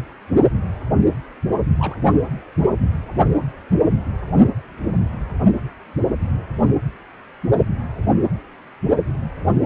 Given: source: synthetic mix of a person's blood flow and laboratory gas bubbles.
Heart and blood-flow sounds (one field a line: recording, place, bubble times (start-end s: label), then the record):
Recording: Doppler ultrasound of blood flow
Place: precordium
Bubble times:
1.78-1.96 s: bubbles
2.03-2.15 s: bubbles
From the record:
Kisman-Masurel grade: 111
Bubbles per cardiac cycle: 1 to 2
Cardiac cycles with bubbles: 1 to 10%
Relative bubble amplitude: barely perceptible (0.100 to 0.250)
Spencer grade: 1 (occasional bubble signal discernible with the cardiac motion signal, with majority of cardiac periods free of bubbles)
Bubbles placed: anywhere in the cardiac cycle